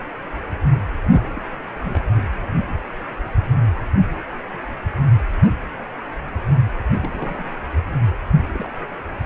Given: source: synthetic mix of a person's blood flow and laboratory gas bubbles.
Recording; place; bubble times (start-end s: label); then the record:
Doppler ultrasound of blood flow; precordium
1.04-1.42 s: bubbles
1.80-2.04 s: bubbles
2.16-2.22 s: bubbles
6.93-7.51 s: bubbles
8.53-8.69 s: bubbles
From the record:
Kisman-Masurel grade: 221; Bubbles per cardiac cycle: several, 3 to 8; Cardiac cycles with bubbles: 10 to 50%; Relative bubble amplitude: barely perceptible (0.100 to 0.250); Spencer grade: 2 (many but less than half of the cardiac periods contain bubble signals, singularly or in groups); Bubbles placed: anywhere in the cardiac cycle